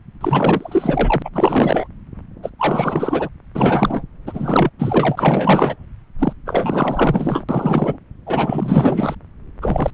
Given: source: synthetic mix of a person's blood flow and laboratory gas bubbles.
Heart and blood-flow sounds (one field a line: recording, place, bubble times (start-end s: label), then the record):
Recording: Doppler ultrasound of blood flow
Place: subclavian vein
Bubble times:
0.21-1.29 s: bubbles
1.32-1.88 s: bubbles
2.42-2.50 s: bubbles
2.58-3.29 s: bubbles
3.55-4.04 s: bubbles
4.27-4.70 s: bubbles
4.79-5.76 s: bubbles
6.19-6.33 s: bubbles
6.45-7.44 s: bubbles
7.49-7.98 s: bubbles
8.26-9.15 s: bubbles
9.61-9.90 s: bubbles
From the record:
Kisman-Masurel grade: 444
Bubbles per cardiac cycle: continuous sound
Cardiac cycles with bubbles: 100%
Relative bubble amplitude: maximal (0.775 to 0.999)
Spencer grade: 4 (maximum detectable bubble signal sounding continuously throughout systole and diastole of every cardiac period, and overriding the amplitude of the normal cardiac signals)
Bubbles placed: anywhere in the cardiac cycle